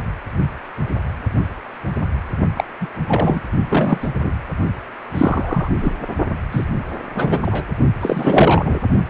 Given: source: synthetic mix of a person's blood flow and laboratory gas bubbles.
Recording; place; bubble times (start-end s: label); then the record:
Doppler ultrasound of blood flow; precordium
2.56-2.64 s: bubbles
2.80-2.87 s: bubbles
3.08-3.41 s: bubbles
3.69-4.09 s: bubbles
4.21-4.31 s: bubbles
5.14-5.68 s: bubbles
5.81-5.93 s: bubbles
6.51-6.67 s: bubbles
7.14-7.42 s: bubbles
7.46-7.63 s: bubbles
8.00-8.79 s: bubbles
From the record:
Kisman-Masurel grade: 223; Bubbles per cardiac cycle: several, 3 to 8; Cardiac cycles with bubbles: 10 to 50%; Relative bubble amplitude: loud (0.450 to 0.775); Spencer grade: 2 (many but less than half of the cardiac periods contain bubble signals, singularly or in groups); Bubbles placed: only in the low amplitude regions of the cardiac cycle